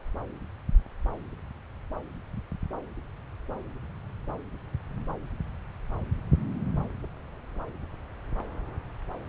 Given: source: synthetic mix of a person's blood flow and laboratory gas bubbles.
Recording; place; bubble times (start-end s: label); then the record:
Doppler ultrasound of blood flow; subclavian vein
no bubbles
From the record:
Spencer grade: 0 (complete lack of bubble signals)